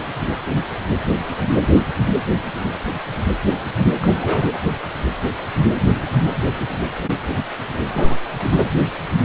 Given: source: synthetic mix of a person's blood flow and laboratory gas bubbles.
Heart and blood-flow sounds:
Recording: Doppler ultrasound of blood flow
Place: precordium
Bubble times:
4.00-4.52 s: bubbles
7.93-8.18 s: bubbles
8.38-8.67 s: bubbles
From the record:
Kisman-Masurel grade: 221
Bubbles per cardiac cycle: several, 3 to 8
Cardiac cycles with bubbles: 10 to 50%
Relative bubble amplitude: barely perceptible (0.100 to 0.250)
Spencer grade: 2 (many but less than half of the cardiac periods contain bubble signals, singularly or in groups)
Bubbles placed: anywhere in the cardiac cycle

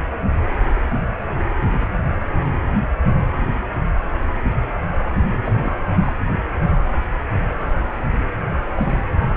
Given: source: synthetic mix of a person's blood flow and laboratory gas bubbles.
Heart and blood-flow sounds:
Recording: Doppler ultrasound of blood flow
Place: precordium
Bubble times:
5.43-5.78 s: bubbles
6.00-6.12 s: bubbles
8.73-9.03 s: bubbles
From the record:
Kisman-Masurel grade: 221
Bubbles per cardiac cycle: several, 3 to 8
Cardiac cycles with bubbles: 10 to 50%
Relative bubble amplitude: barely perceptible (0.100 to 0.250)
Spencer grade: 2 (many but less than half of the cardiac periods contain bubble signals, singularly or in groups)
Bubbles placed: anywhere in the cardiac cycle

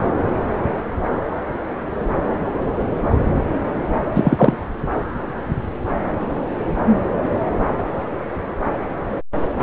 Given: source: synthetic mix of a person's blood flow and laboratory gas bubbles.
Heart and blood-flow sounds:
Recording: Doppler ultrasound of blood flow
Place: subclavian vein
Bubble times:
4.15-4.55 s: bubbles
From the record:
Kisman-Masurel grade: 113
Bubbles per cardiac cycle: 1 to 2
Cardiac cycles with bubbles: 1 to 10%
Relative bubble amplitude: loud (0.450 to 0.775)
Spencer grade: 1 (occasional bubble signal discernible with the cardiac motion signal, with majority of cardiac periods free of bubbles)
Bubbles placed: anywhere in the cardiac cycle

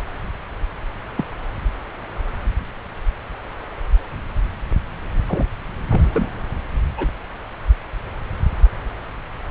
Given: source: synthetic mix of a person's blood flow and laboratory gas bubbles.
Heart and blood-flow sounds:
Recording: Doppler ultrasound of blood flow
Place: subclavian vein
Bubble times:
1.17-1.24 s: bubbles
5.27-5.46 s: bubbles
5.88-6.01 s: bubbles
6.12-6.28 s: bubbles
6.97-7.08 s: bubbles
From the record:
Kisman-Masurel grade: 122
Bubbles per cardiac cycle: 1 to 2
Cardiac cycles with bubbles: 10 to 50%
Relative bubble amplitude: moderate (0.250 to 0.450)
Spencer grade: 2 (many but less than half of the cardiac periods contain bubble signals, singularly or in groups)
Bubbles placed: anywhere in the cardiac cycle

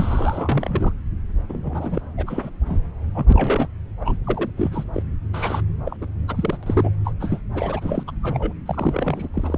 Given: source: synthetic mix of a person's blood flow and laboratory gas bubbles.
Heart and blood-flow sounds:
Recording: Doppler ultrasound of blood flow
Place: subclavian vein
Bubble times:
0.00-0.93 s: bubbles
1.49-2.02 s: bubbles
2.17-2.50 s: bubbles
2.66-2.80 s: bubbles
3.15-3.25 s: bubbles
3.32-3.68 s: bubbles
4.00-4.17 s: bubbles
4.24-4.50 s: bubbles
4.57-4.84 s: bubbles
4.94-5.03 s: bubbles
5.33-5.63 s: bubbles
5.85-5.96 s: bubbles
6.01-6.06 s: bubbles
6.28-6.58 s: bubbles
6.62-6.91 s: bubbles
7.04-7.13 s: bubbles
7.20-7.41 s: bubbles
7.54-8.04 s: bubbles
8.07-8.12 s: bubbles
8.22-8.53 s: bubbles
8.65-9.28 s: bubbles
9.34-9.58 s: bubbles
From the record:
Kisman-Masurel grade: 342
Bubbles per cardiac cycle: rolling drumbeat, 9 or more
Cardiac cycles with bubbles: 100%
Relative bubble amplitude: moderate (0.250 to 0.450)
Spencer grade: 3 (all of the cardiac periods contain showers or single bubble signals, but not dominating or overriding the cardiac motion signals)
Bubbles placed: anywhere in the cardiac cycle

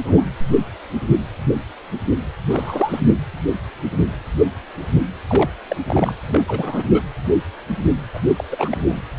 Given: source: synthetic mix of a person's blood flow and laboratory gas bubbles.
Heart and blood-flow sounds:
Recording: Doppler ultrasound of blood flow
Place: precordium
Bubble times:
0.07-0.25 s: bubbles
2.50-3.10 s: bubbles
5.27-5.51 s: bubbles
5.68-5.76 s: bubbles
5.87-6.12 s: bubbles
6.27-6.44 s: bubbles
6.47-6.85 s: bubbles
6.92-7.02 s: bubbles
8.13-8.20 s: bubbles
8.37-8.44 s: bubbles
8.51-8.96 s: bubbles
From the record:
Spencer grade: 2 (many but less than half of the cardiac periods contain bubble signals, singularly or in groups)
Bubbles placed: anywhere in the cardiac cycle

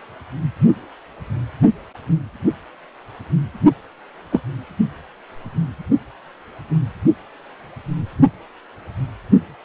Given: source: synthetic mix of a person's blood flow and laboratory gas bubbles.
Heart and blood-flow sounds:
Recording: Doppler ultrasound of blood flow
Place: precordium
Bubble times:
4.32-4.40 s: bubbles
From the record:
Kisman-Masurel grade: 113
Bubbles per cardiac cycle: 1 to 2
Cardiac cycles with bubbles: 1 to 10%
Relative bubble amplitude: loud (0.450 to 0.775)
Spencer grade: 1 (occasional bubble signal discernible with the cardiac motion signal, with majority of cardiac periods free of bubbles)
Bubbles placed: only in the low amplitude regions of the cardiac cycle

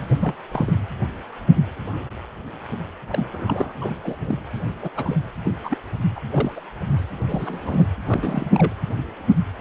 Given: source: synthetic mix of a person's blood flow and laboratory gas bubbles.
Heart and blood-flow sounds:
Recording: Doppler ultrasound of blood flow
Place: precordium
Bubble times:
0.19-0.34 s: bubbles
0.52-0.72 s: bubbles
3.09-3.27 s: bubbles
3.33-3.72 s: bubbles
3.81-3.93 s: bubbles
4.03-4.15 s: bubbles
4.18-4.39 s: bubbles
4.81-4.90 s: bubbles
4.96-5.15 s: bubbles
5.44-5.53 s: bubbles
5.63-5.77 s: bubbles
6.15-6.20 s: bubbles
6.31-6.53 s: bubbles
6.56-6.61 s: bubbles
7.28-7.86 s: bubbles
8.08-8.74 s: bubbles
From the record:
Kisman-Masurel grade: 232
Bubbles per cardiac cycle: several, 3 to 8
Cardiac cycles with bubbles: 50 to 99%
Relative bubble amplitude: moderate (0.250 to 0.450)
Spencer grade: 3 (all of the cardiac periods contain showers or single bubble signals, but not dominating or overriding the cardiac motion signals)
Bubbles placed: anywhere in the cardiac cycle

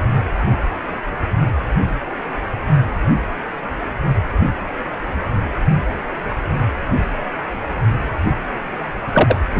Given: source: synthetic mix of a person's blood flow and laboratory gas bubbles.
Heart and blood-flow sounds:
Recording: Doppler ultrasound of blood flow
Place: precordium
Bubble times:
9.12-9.41 s: bubbles
9.55-9.60 s: bubbles
From the record:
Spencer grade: 1 (occasional bubble signal discernible with the cardiac motion signal, with majority of cardiac periods free of bubbles)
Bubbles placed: anywhere in the cardiac cycle

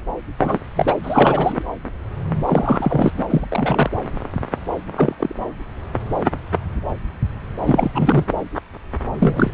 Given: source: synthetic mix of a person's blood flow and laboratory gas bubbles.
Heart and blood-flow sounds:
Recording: Doppler ultrasound of blood flow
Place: subclavian vein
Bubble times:
0.39-0.59 s: bubbles
0.76-0.95 s: bubbles
1.03-1.62 s: bubbles
2.45-3.22 s: bubbles
3.30-3.46 s: bubbles
3.50-3.90 s: bubbles
4.96-5.15 s: bubbles
5.19-5.35 s: bubbles
7.66-7.91 s: bubbles
7.93-8.25 s: bubbles
9.19-9.51 s: bubbles
From the record:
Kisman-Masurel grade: 233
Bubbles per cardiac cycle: several, 3 to 8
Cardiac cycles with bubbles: 50 to 99%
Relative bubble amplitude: loud (0.450 to 0.775)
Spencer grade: 3 (all of the cardiac periods contain showers or single bubble signals, but not dominating or overriding the cardiac motion signals)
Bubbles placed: anywhere in the cardiac cycle

